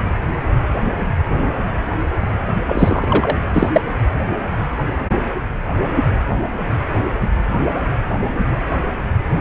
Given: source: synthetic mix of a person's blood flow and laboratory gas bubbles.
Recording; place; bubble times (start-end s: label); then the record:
Doppler ultrasound of blood flow; precordium
2.66-3.37 s: bubbles
3.54-3.69 s: bubbles
3.72-3.82 s: bubbles
From the record:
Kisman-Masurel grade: 213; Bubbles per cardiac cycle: several, 3 to 8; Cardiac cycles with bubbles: 1 to 10%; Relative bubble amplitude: loud (0.450 to 0.775); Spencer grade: 1 (occasional bubble signal discernible with the cardiac motion signal, with majority of cardiac periods free of bubbles); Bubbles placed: anywhere in the cardiac cycle